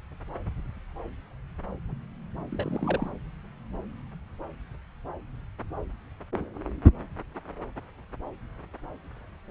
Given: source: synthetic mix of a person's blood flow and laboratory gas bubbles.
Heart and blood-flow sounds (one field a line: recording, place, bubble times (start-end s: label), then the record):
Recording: Doppler ultrasound of blood flow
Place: subclavian vein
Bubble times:
2.52-3.12 s: bubbles
From the record:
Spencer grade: 1 (occasional bubble signal discernible with the cardiac motion signal, with majority of cardiac periods free of bubbles)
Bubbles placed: anywhere in the cardiac cycle